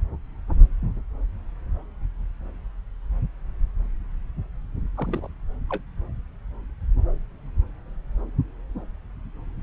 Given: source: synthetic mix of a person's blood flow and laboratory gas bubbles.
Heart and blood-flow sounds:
Doppler ultrasound of blood flow; subclavian vein
4.97-5.33 s: bubbles
5.69-5.82 s: bubbles
From the record:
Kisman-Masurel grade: 211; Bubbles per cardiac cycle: several, 3 to 8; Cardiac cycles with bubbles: 1 to 10%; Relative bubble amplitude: barely perceptible (0.100 to 0.250); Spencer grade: 1 (occasional bubble signal discernible with the cardiac motion signal, with majority of cardiac periods free of bubbles); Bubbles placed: anywhere in the cardiac cycle

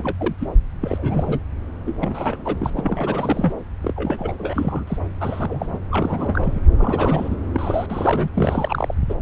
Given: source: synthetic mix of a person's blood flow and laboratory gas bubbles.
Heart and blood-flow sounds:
Doppler ultrasound of blood flow; subclavian vein
0.00-0.15 s: bubbles
0.18-0.35 s: bubbles
0.38-0.48 s: bubbles
0.81-1.39 s: bubbles
1.86-1.94 s: bubbles
2.00-2.37 s: bubbles
2.44-2.56 s: bubbles
2.59-2.70 s: bubbles
2.76-2.81 s: bubbles
2.83-3.53 s: bubbles
3.83-3.93 s: bubbles
3.96-4.35 s: bubbles
4.38-4.98 s: bubbles
5.20-5.79 s: bubbles
5.91-6.60 s: bubbles
6.77-7.35 s: bubbles
7.54-7.86 s: bubbles
7.89-8.29 s: bubbles
8.34-8.94 s: bubbles
9.09-9.14 s: bubbles
From the record:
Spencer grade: 3 (all of the cardiac periods contain showers or single bubble signals, but not dominating or overriding the cardiac motion signals); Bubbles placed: anywhere in the cardiac cycle

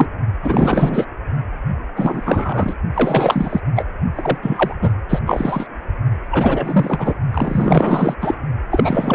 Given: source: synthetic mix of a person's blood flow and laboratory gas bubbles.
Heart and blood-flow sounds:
Doppler ultrasound of blood flow; precordium
0.00-0.07 s: bubbles
0.43-1.05 s: bubbles
1.96-2.74 s: bubbles
2.94-3.60 s: bubbles
3.75-3.84 s: bubbles
4.15-4.38 s: bubbles
4.42-4.75 s: bubbles
4.82-4.92 s: bubbles
5.09-5.19 s: bubbles
5.25-5.67 s: bubbles
6.31-7.14 s: bubbles
7.32-8.15 s: bubbles
8.21-8.34 s: bubbles
8.71-9.15 s: bubbles
From the record:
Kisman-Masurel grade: 444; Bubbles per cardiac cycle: continuous sound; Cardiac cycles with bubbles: 100%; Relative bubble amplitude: maximal (0.775 to 0.999); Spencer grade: 4 (maximum detectable bubble signal sounding continuously throughout systole and diastole of every cardiac period, and overriding the amplitude of the normal cardiac signals); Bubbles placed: only in the low amplitude regions of the cardiac cycle

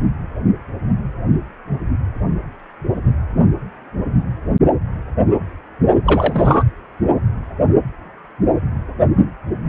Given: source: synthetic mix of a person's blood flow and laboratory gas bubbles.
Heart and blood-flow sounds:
Doppler ultrasound of blood flow; precordium
6.04-6.64 s: bubbles
From the record:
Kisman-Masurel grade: 213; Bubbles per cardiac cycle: several, 3 to 8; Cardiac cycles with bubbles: 1 to 10%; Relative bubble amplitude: loud (0.450 to 0.775); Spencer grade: 1 (occasional bubble signal discernible with the cardiac motion signal, with majority of cardiac periods free of bubbles); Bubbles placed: anywhere in the cardiac cycle

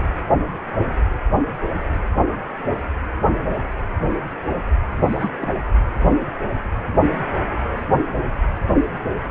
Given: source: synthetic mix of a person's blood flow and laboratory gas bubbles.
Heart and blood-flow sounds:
Doppler ultrasound of blood flow; precordium
5.04-5.29 s: bubbles
5.41-5.54 s: bubbles
From the record:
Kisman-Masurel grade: 111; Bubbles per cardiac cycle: 1 to 2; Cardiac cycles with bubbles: 1 to 10%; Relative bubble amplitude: barely perceptible (0.100 to 0.250); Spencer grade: 1 (occasional bubble signal discernible with the cardiac motion signal, with majority of cardiac periods free of bubbles); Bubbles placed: anywhere in the cardiac cycle

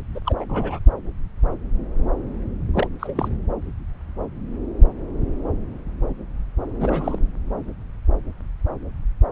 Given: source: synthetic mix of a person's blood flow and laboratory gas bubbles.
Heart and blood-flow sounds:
Doppler ultrasound of blood flow; subclavian vein
0.15-0.21 s: bubbles
0.25-0.35 s: bubbles
0.38-0.45 s: bubbles
0.49-0.79 s: bubbles
2.73-2.88 s: bubbles
2.99-3.29 s: bubbles
6.80-7.19 s: bubbles
From the record:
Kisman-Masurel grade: 222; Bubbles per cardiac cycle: several, 3 to 8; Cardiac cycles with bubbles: 10 to 50%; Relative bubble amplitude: moderate (0.250 to 0.450); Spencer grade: 2 (many but less than half of the cardiac periods contain bubble signals, singularly or in groups); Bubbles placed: anywhere in the cardiac cycle

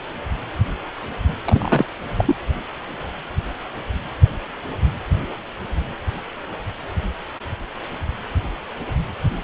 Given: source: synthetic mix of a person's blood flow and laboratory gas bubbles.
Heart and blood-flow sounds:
Doppler ultrasound of blood flow; precordium
1.44-1.85 s: bubbles
2.17-2.35 s: bubbles
From the record:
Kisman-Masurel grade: 212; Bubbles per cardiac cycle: several, 3 to 8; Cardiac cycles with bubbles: 1 to 10%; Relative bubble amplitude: moderate (0.250 to 0.450); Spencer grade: 1 (occasional bubble signal discernible with the cardiac motion signal, with majority of cardiac periods free of bubbles); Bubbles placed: anywhere in the cardiac cycle

